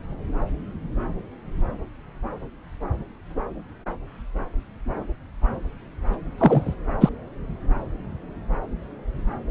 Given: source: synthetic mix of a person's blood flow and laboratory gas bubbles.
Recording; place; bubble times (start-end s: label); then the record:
Doppler ultrasound of blood flow; subclavian vein
6.38-6.75 s: bubbles
7.00-7.09 s: bubbles
From the record:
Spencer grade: 1 (occasional bubble signal discernible with the cardiac motion signal, with majority of cardiac periods free of bubbles); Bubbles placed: anywhere in the cardiac cycle